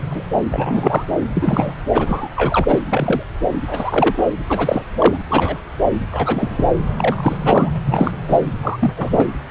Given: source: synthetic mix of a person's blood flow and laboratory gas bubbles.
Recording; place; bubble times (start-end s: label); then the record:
Doppler ultrasound of blood flow; subclavian vein
0.09-0.23 s: bubbles
0.48-1.05 s: bubbles
1.34-1.73 s: bubbles
1.92-2.29 s: bubbles
2.35-2.65 s: bubbles
2.67-2.79 s: bubbles
2.90-3.23 s: bubbles
3.70-4.29 s: bubbles
4.47-4.84 s: bubbles
4.98-5.17 s: bubbles
5.29-5.58 s: bubbles
6.10-6.67 s: bubbles
6.96-7.73 s: bubbles
7.76-7.79 s: bubbles
7.86-8.11 s: bubbles
8.28-8.41 s: bubbles
8.62-8.77 s: bubbles
8.80-8.94 s: bubbles
8.96-9.26 s: bubbles
From the record:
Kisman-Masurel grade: 233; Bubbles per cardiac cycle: several, 3 to 8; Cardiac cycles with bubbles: 50 to 99%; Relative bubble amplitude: loud (0.450 to 0.775); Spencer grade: 3 (all of the cardiac periods contain showers or single bubble signals, but not dominating or overriding the cardiac motion signals); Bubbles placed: anywhere in the cardiac cycle